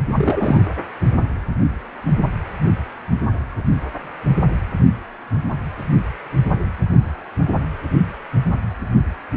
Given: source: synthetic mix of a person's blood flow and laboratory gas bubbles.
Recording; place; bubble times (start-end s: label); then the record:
Doppler ultrasound of blood flow; precordium
0.14-0.59 s: bubbles
From the record:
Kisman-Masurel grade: 213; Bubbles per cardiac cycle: several, 3 to 8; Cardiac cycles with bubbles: 1 to 10%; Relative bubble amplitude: loud (0.450 to 0.775); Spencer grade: 1 (occasional bubble signal discernible with the cardiac motion signal, with majority of cardiac periods free of bubbles); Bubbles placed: anywhere in the cardiac cycle